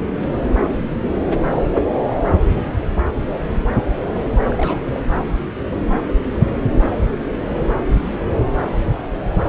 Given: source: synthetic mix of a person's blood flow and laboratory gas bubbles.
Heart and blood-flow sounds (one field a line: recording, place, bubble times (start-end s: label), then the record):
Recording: Doppler ultrasound of blood flow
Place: subclavian vein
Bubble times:
4.50-5.00 s: bubbles
From the record:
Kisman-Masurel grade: 211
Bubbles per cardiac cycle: several, 3 to 8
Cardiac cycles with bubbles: 1 to 10%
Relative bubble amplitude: barely perceptible (0.100 to 0.250)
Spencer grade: 1 (occasional bubble signal discernible with the cardiac motion signal, with majority of cardiac periods free of bubbles)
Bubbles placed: anywhere in the cardiac cycle